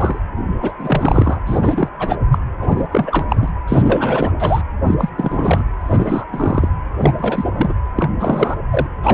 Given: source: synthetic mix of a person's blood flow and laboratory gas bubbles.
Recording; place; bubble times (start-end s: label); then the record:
Doppler ultrasound of blood flow; precordium
0.00-0.20 s: bubbles
0.57-0.73 s: bubbles
0.79-1.39 s: bubbles
1.46-1.89 s: bubbles
1.99-2.17 s: bubbles
2.31-2.38 s: bubbles
2.59-2.87 s: bubbles
2.92-3.26 s: bubbles
3.29-3.50 s: bubbles
3.67-4.32 s: bubbles
4.39-4.62 s: bubbles
4.86-4.94 s: bubbles
4.98-5.09 s: bubbles
5.17-5.63 s: bubbles
5.79-6.25 s: bubbles
6.32-6.69 s: bubbles
6.98-7.13 s: bubbles
7.17-7.74 s: bubbles
7.96-8.10 s: bubbles
8.19-8.57 s: bubbles
8.71-8.87 s: bubbles
9.03-9.14 s: bubbles
From the record:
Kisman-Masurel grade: 343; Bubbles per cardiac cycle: rolling drumbeat, 9 or more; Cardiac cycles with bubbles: 100%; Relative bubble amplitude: loud (0.450 to 0.775); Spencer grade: 3 (all of the cardiac periods contain showers or single bubble signals, but not dominating or overriding the cardiac motion signals); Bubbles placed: anywhere in the cardiac cycle